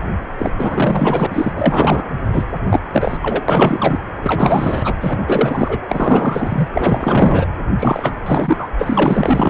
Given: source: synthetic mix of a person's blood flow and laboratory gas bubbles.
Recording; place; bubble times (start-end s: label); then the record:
Doppler ultrasound of blood flow; precordium
0.39-0.53 s: bubbles
0.56-1.26 s: bubbles
1.30-1.52 s: bubbles
1.55-2.04 s: bubbles
2.32-2.45 s: bubbles
2.64-2.80 s: bubbles
2.92-3.17 s: bubbles
3.22-3.46 s: bubbles
3.48-4.00 s: bubbles
4.22-4.95 s: bubbles
5.00-5.79 s: bubbles
5.88-6.68 s: bubbles
6.72-7.46 s: bubbles
7.78-8.16 s: bubbles
8.26-8.68 s: bubbles
8.79-9.50 s: bubbles
From the record:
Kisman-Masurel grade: 444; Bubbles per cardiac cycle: continuous sound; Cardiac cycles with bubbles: 100%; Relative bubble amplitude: maximal (0.775 to 0.999); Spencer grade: 4 (maximum detectable bubble signal sounding continuously throughout systole and diastole of every cardiac period, and overriding the amplitude of the normal cardiac signals); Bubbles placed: anywhere in the cardiac cycle